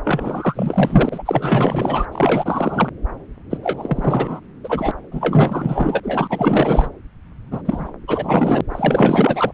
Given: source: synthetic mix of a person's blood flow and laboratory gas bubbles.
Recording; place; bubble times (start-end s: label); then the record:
Doppler ultrasound of blood flow; subclavian vein
0.04-2.06 s: bubbles
2.12-2.90 s: bubbles
3.50-3.58 s: bubbles
3.62-4.40 s: bubbles
4.63-4.92 s: bubbles
5.12-6.00 s: bubbles
6.03-6.88 s: bubbles
7.50-7.62 s: bubbles
7.65-7.92 s: bubbles
8.07-8.61 s: bubbles
8.70-9.52 s: bubbles
From the record:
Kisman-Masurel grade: 444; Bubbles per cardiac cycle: continuous sound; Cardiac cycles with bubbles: 100%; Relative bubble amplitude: maximal (0.775 to 0.999); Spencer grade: 4 (maximum detectable bubble signal sounding continuously throughout systole and diastole of every cardiac period, and overriding the amplitude of the normal cardiac signals); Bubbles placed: anywhere in the cardiac cycle